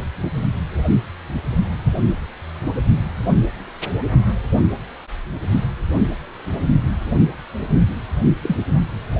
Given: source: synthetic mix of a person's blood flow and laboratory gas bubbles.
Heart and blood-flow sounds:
Doppler ultrasound of blood flow; precordium
8.43-8.56 s: bubbles
From the record:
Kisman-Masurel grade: 113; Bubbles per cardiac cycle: 1 to 2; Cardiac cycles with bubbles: 1 to 10%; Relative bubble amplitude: loud (0.450 to 0.775); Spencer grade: 1 (occasional bubble signal discernible with the cardiac motion signal, with majority of cardiac periods free of bubbles); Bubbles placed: only in the low amplitude regions of the cardiac cycle

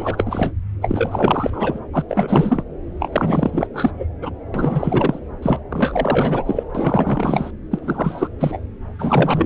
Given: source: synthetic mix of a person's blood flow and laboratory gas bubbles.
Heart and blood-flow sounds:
Doppler ultrasound of blood flow; subclavian vein
0.00-0.52 s: bubbles
0.82-1.80 s: bubbles
1.93-2.04 s: bubbles
2.08-2.63 s: bubbles
3.00-3.10 s: bubbles
3.12-3.67 s: bubbles
3.73-3.92 s: bubbles
3.97-4.05 s: bubbles
4.21-4.31 s: bubbles
4.54-5.19 s: bubbles
5.42-5.62 s: bubbles
5.70-6.63 s: bubbles
6.75-7.50 s: bubbles
7.71-8.29 s: bubbles
8.38-8.60 s: bubbles
8.98-9.46 s: bubbles
From the record:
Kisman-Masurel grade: 444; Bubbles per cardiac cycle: continuous sound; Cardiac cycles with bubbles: 100%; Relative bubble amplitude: maximal (0.775 to 0.999); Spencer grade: 4 (maximum detectable bubble signal sounding continuously throughout systole and diastole of every cardiac period, and overriding the amplitude of the normal cardiac signals); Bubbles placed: anywhere in the cardiac cycle

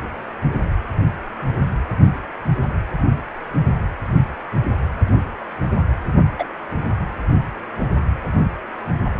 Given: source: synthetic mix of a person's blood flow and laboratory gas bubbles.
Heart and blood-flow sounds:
Doppler ultrasound of blood flow; precordium
6.39-6.45 s: bubbles
From the record:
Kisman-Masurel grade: 123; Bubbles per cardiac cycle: 1 to 2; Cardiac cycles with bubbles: 10 to 50%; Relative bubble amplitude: loud (0.450 to 0.775); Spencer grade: 2 (many but less than half of the cardiac periods contain bubble signals, singularly or in groups); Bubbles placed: anywhere in the cardiac cycle

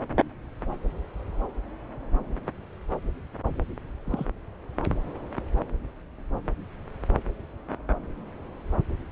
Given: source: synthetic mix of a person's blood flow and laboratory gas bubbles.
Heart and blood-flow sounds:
Doppler ultrasound of blood flow; subclavian vein
4.04-4.28 s: bubbles
From the record:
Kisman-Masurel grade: 112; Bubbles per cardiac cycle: 1 to 2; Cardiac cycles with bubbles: 1 to 10%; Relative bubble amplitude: moderate (0.250 to 0.450); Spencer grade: 1 (occasional bubble signal discernible with the cardiac motion signal, with majority of cardiac periods free of bubbles); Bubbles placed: anywhere in the cardiac cycle

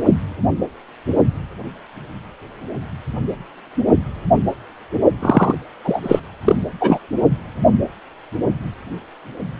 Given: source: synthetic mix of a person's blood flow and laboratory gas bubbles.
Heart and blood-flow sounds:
Doppler ultrasound of blood flow; precordium
5.21-5.54 s: bubbles
5.84-6.20 s: bubbles
6.45-6.55 s: bubbles
6.80-6.99 s: bubbles
From the record:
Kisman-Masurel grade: 223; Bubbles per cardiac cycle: several, 3 to 8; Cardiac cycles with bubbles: 10 to 50%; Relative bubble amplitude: loud (0.450 to 0.775); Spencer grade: 2 (many but less than half of the cardiac periods contain bubble signals, singularly or in groups); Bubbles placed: only in the low amplitude regions of the cardiac cycle

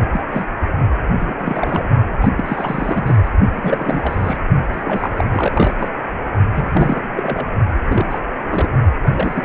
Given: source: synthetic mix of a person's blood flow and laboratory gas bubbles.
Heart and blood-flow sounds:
Doppler ultrasound of blood flow; precordium
0.12-0.21 s: bubbles
0.32-0.46 s: bubbles
1.19-1.90 s: bubbles
2.21-2.28 s: bubbles
2.35-3.29 s: bubbles
3.52-4.38 s: bubbles
4.73-5.25 s: bubbles
5.33-5.90 s: bubbles
6.54-7.12 s: bubbles
7.17-7.46 s: bubbles
7.88-8.06 s: bubbles
8.11-8.19 s: bubbles
8.47-8.71 s: bubbles
9.03-9.44 s: bubbles
From the record:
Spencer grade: 3 (all of the cardiac periods contain showers or single bubble signals, but not dominating or overriding the cardiac motion signals); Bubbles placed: only in the low amplitude regions of the cardiac cycle

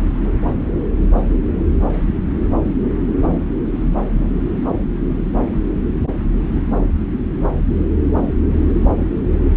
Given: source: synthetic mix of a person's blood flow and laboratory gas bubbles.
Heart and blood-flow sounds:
Doppler ultrasound of blood flow; subclavian vein
9.54-9.57 s: bubbles
From the record:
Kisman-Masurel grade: 211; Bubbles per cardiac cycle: several, 3 to 8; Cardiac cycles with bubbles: 1 to 10%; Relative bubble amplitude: barely perceptible (0.100 to 0.250); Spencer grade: 1 (occasional bubble signal discernible with the cardiac motion signal, with majority of cardiac periods free of bubbles); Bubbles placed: anywhere in the cardiac cycle

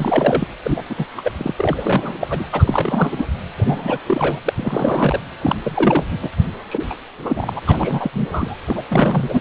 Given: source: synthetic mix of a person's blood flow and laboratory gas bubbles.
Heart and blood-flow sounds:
Doppler ultrasound of blood flow; precordium
0.00-0.48 s: bubbles
0.64-0.81 s: bubbles
0.89-1.05 s: bubbles
1.17-1.31 s: bubbles
1.38-1.53 s: bubbles
1.57-2.46 s: bubbles
2.52-3.26 s: bubbles
3.58-3.98 s: bubbles
4.06-4.40 s: bubbles
4.45-5.21 s: bubbles
5.42-5.55 s: bubbles
5.63-6.04 s: bubbles
6.12-6.18 s: bubbles
6.21-6.29 s: bubbles
6.69-6.84 s: bubbles
6.90-6.95 s: bubbles
7.16-7.53 s: bubbles
7.56-7.60 s: bubbles
7.67-8.10 s: bubbles
8.12-8.57 s: bubbles
8.67-8.82 s: bubbles
8.89-9.40 s: bubbles
From the record:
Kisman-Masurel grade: 342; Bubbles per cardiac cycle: rolling drumbeat, 9 or more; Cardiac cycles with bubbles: 100%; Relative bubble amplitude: moderate (0.250 to 0.450); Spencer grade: 3 (all of the cardiac periods contain showers or single bubble signals, but not dominating or overriding the cardiac motion signals); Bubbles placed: anywhere in the cardiac cycle

